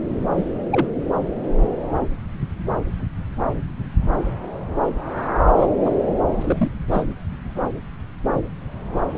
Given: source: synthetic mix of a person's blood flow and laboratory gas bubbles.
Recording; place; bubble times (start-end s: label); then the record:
Doppler ultrasound of blood flow; subclavian vein
0.36-0.48 s: bubbles
0.72-0.86 s: bubbles
5.58-5.67 s: bubbles
5.86-5.90 s: bubbles
6.43-6.71 s: bubbles
6.92-7.05 s: bubbles
From the record:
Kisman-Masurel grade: 122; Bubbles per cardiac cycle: 1 to 2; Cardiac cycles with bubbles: 10 to 50%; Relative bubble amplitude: moderate (0.250 to 0.450); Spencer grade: 2 (many but less than half of the cardiac periods contain bubble signals, singularly or in groups); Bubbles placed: anywhere in the cardiac cycle